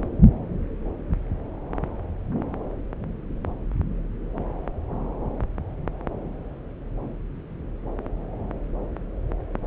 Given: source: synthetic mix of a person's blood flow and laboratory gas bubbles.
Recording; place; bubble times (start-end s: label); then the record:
Doppler ultrasound of blood flow; subclavian vein
no bubbles
From the record:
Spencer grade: 0 (complete lack of bubble signals)